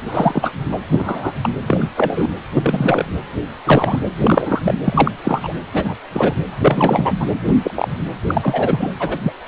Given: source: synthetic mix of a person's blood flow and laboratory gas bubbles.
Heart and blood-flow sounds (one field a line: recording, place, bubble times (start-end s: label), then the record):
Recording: Doppler ultrasound of blood flow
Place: precordium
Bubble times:
0.07-0.51 s: bubbles
0.71-0.79 s: bubbles
0.92-1.33 s: bubbles
1.42-1.49 s: bubbles
1.67-1.89 s: bubbles
1.96-2.28 s: bubbles
2.52-3.04 s: bubbles
3.64-3.99 s: bubbles
4.18-4.61 s: bubbles
4.63-4.75 s: bubbles
4.84-5.12 s: bubbles
5.24-5.54 s: bubbles
5.73-5.95 s: bubbles
6.12-6.34 s: bubbles
6.59-7.13 s: bubbles
7.19-7.26 s: bubbles
7.45-7.55 s: bubbles
7.64-7.71 s: bubbles
7.75-7.88 s: bubbles
8.27-8.92 s: bubbles
8.98-9.18 s: bubbles
9.22-9.32 s: bubbles
From the record:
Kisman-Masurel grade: 243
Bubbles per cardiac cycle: several, 3 to 8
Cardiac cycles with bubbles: 100%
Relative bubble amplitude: loud (0.450 to 0.775)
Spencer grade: 3 (all of the cardiac periods contain showers or single bubble signals, but not dominating or overriding the cardiac motion signals)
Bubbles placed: anywhere in the cardiac cycle